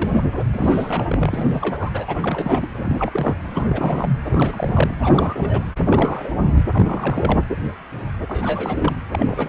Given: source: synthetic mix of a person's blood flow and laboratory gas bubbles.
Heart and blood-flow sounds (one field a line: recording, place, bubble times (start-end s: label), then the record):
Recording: Doppler ultrasound of blood flow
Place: precordium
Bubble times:
0.00-0.10 s: bubbles
0.14-0.23 s: bubbles
0.53-1.04 s: bubbles
1.08-2.67 s: bubbles
2.78-3.37 s: bubbles
3.51-4.11 s: bubbles
4.25-4.96 s: bubbles
5.01-5.68 s: bubbles
5.85-6.33 s: bubbles
6.35-6.63 s: bubbles
6.73-7.39 s: bubbles
8.28-8.96 s: bubbles
9.12-9.49 s: bubbles
From the record:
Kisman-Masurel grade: 332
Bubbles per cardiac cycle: rolling drumbeat, 9 or more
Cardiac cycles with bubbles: 50 to 99%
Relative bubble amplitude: moderate (0.250 to 0.450)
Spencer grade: 3 (all of the cardiac periods contain showers or single bubble signals, but not dominating or overriding the cardiac motion signals)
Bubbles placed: anywhere in the cardiac cycle